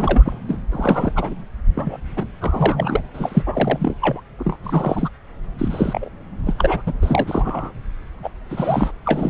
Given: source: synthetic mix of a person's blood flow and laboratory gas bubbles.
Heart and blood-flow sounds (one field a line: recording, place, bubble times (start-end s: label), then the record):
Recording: Doppler ultrasound of blood flow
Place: subclavian vein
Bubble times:
0.00-0.38 s: bubbles
0.49-0.59 s: bubbles
0.72-1.12 s: bubbles
1.16-1.34 s: bubbles
1.74-1.97 s: bubbles
2.15-2.27 s: bubbles
2.41-3.00 s: bubbles
3.13-3.43 s: bubbles
3.46-3.95 s: bubbles
4.01-4.21 s: bubbles
4.38-4.56 s: bubbles
4.63-5.09 s: bubbles
5.58-6.09 s: bubbles
6.46-6.55 s: bubbles
6.58-6.82 s: bubbles
6.87-6.93 s: bubbles
7.01-7.73 s: bubbles
8.22-8.29 s: bubbles
8.50-8.92 s: bubbles
9.04-9.30 s: bubbles
From the record:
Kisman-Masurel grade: 342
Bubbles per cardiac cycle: rolling drumbeat, 9 or more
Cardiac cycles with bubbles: 100%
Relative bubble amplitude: moderate (0.250 to 0.450)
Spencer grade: 3 (all of the cardiac periods contain showers or single bubble signals, but not dominating or overriding the cardiac motion signals)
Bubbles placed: anywhere in the cardiac cycle